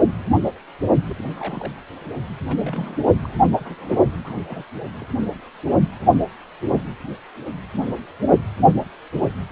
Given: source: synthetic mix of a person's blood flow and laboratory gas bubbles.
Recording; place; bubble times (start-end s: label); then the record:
Doppler ultrasound of blood flow; precordium
1.09-1.14 s: bubbles
1.18-1.23 s: bubbles
1.34-1.75 s: bubbles
1.78-1.80 s: bubbles
2.45-2.55 s: bubbles
2.59-3.02 s: bubbles
3.23-3.27 s: bubbles
3.60-3.97 s: bubbles
4.23-4.43 s: bubbles
4.47-4.63 s: bubbles
4.84-5.05 s: bubbles
9.40-9.46 s: bubbles
From the record:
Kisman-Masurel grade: 221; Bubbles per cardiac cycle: several, 3 to 8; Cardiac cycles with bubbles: 10 to 50%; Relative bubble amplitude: barely perceptible (0.100 to 0.250); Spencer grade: 2 (many but less than half of the cardiac periods contain bubble signals, singularly or in groups); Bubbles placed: only in the low amplitude regions of the cardiac cycle